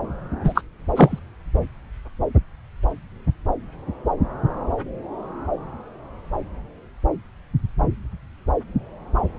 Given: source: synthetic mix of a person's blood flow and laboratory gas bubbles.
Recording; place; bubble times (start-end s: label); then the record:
Doppler ultrasound of blood flow; subclavian vein
0.44-0.62 s: bubbles
0.95-1.19 s: bubbles
From the record:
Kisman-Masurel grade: 213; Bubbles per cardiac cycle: several, 3 to 8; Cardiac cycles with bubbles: 1 to 10%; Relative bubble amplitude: loud (0.450 to 0.775); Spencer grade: 1 (occasional bubble signal discernible with the cardiac motion signal, with majority of cardiac periods free of bubbles); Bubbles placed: anywhere in the cardiac cycle